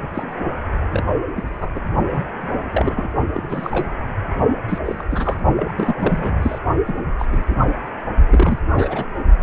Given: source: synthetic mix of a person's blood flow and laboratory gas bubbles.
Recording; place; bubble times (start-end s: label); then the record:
Doppler ultrasound of blood flow; precordium
0.14-0.31 s: bubbles
0.91-1.04 s: bubbles
1.34-1.44 s: bubbles
1.48-1.70 s: bubbles
1.74-1.80 s: bubbles
2.12-2.24 s: bubbles
2.41-3.10 s: bubbles
3.33-3.87 s: bubbles
4.69-4.78 s: bubbles
4.84-5.04 s: bubbles
5.10-5.37 s: bubbles
5.56-5.72 s: bubbles
5.77-5.95 s: bubbles
5.99-6.58 s: bubbles
6.86-7.04 s: bubbles
7.19-7.55 s: bubbles
7.62-7.66 s: bubbles
8.28-8.59 s: bubbles
8.75-9.06 s: bubbles
From the record:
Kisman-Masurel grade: 242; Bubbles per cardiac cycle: several, 3 to 8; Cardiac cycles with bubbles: 100%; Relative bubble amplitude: moderate (0.250 to 0.450); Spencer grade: 3 (all of the cardiac periods contain showers or single bubble signals, but not dominating or overriding the cardiac motion signals); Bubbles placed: only in the low amplitude regions of the cardiac cycle